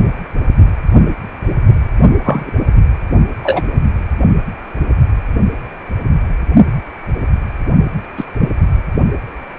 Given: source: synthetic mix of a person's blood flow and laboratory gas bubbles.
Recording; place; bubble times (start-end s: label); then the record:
Doppler ultrasound of blood flow; precordium
2.24-2.50 s: bubbles
3.43-3.62 s: bubbles
8.17-8.26 s: bubbles
8.40-8.50 s: bubbles
From the record:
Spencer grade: 2 (many but less than half of the cardiac periods contain bubble signals, singularly or in groups); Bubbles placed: only in the low amplitude regions of the cardiac cycle